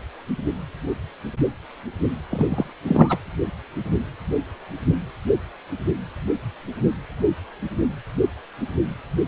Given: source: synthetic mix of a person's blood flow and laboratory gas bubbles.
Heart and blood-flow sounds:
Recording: Doppler ultrasound of blood flow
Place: precordium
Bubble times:
2.23-2.74 s: bubbles
2.88-3.18 s: bubbles
From the record:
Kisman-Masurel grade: 213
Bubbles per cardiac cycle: several, 3 to 8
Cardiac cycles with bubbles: 1 to 10%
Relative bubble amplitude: loud (0.450 to 0.775)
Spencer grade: 1 (occasional bubble signal discernible with the cardiac motion signal, with majority of cardiac periods free of bubbles)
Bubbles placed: anywhere in the cardiac cycle

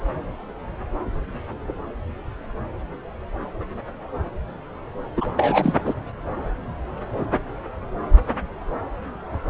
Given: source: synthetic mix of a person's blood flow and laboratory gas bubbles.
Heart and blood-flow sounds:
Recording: Doppler ultrasound of blood flow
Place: subclavian vein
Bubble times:
5.16-5.25 s: bubbles
5.37-5.76 s: bubbles
5.85-5.94 s: bubbles
From the record:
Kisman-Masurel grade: 212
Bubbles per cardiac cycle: several, 3 to 8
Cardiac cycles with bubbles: 1 to 10%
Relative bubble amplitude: moderate (0.250 to 0.450)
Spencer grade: 1 (occasional bubble signal discernible with the cardiac motion signal, with majority of cardiac periods free of bubbles)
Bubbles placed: anywhere in the cardiac cycle

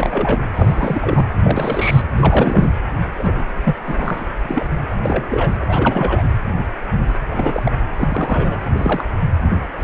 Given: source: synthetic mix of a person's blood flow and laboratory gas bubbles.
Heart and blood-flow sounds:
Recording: Doppler ultrasound of blood flow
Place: precordium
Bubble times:
0.00-0.45 s: bubbles
0.53-1.29 s: bubbles
1.43-2.02 s: bubbles
2.16-2.70 s: bubbles
3.18-3.43 s: bubbles
3.64-3.75 s: bubbles
3.86-4.24 s: bubbles
4.45-4.66 s: bubbles
4.90-4.96 s: bubbles
5.03-5.24 s: bubbles
5.29-5.51 s: bubbles
5.60-6.22 s: bubbles
7.31-7.62 s: bubbles
7.65-7.72 s: bubbles
7.99-8.59 s: bubbles
8.73-9.04 s: bubbles
From the record:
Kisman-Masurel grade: 232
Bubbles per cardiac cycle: several, 3 to 8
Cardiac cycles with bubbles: 50 to 99%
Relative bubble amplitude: moderate (0.250 to 0.450)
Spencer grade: 3 (all of the cardiac periods contain showers or single bubble signals, but not dominating or overriding the cardiac motion signals)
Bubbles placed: anywhere in the cardiac cycle

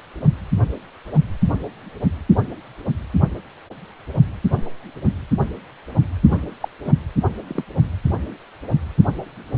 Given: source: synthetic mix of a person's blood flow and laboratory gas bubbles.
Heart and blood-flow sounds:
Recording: Doppler ultrasound of blood flow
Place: precordium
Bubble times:
6.31-6.37 s: bubbles
6.61-6.69 s: bubbles
6.84-6.92 s: bubbles
7.47-7.63 s: bubbles
From the record:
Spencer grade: 1 (occasional bubble signal discernible with the cardiac motion signal, with majority of cardiac periods free of bubbles)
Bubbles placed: only in the low amplitude regions of the cardiac cycle

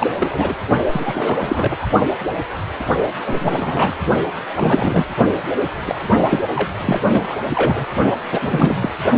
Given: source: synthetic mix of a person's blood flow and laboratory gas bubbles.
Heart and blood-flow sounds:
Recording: Doppler ultrasound of blood flow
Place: precordium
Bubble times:
0.00-0.07 s: bubbles
0.19-0.55 s: bubbles
0.89-1.76 s: bubbles
1.81-1.87 s: bubbles
3.26-3.95 s: bubbles
4.54-5.06 s: bubbles
5.17-5.25 s: bubbles
5.86-5.95 s: bubbles
6.29-6.42 s: bubbles
6.55-6.71 s: bubbles
6.78-7.00 s: bubbles
7.12-7.38 s: bubbles
7.50-7.86 s: bubbles
8.31-8.76 s: bubbles
8.81-8.91 s: bubbles
From the record:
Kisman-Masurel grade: 332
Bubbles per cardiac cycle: rolling drumbeat, 9 or more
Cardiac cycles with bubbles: 50 to 99%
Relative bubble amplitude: moderate (0.250 to 0.450)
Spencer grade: 3 (all of the cardiac periods contain showers or single bubble signals, but not dominating or overriding the cardiac motion signals)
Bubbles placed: only in the low amplitude regions of the cardiac cycle

